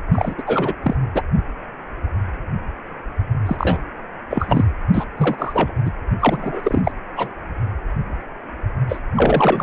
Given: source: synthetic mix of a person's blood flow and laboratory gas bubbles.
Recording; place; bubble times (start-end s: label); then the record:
Doppler ultrasound of blood flow; precordium
0.11-0.34 s: bubbles
0.38-0.43 s: bubbles
0.46-0.74 s: bubbles
0.83-0.96 s: bubbles
1.14-1.22 s: bubbles
3.46-3.81 s: bubbles
4.29-4.65 s: bubbles
4.94-5.05 s: bubbles
5.17-5.36 s: bubbles
5.38-5.71 s: bubbles
5.84-5.91 s: bubbles
6.20-6.92 s: bubbles
7.17-7.29 s: bubbles
8.88-8.99 s: bubbles
9.15-9.63 s: bubbles
From the record:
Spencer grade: 3 (all of the cardiac periods contain showers or single bubble signals, but not dominating or overriding the cardiac motion signals); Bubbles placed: only in the low amplitude regions of the cardiac cycle